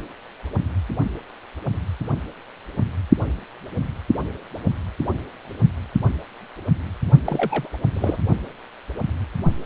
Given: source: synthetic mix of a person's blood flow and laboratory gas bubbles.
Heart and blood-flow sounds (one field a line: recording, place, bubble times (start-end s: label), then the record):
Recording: Doppler ultrasound of blood flow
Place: precordium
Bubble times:
7.25-7.68 s: bubbles
7.93-8.17 s: bubbles
From the record:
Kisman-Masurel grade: 222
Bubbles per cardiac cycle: several, 3 to 8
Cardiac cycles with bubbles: 10 to 50%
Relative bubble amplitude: moderate (0.250 to 0.450)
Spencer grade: 2 (many but less than half of the cardiac periods contain bubble signals, singularly or in groups)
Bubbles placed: only in the low amplitude regions of the cardiac cycle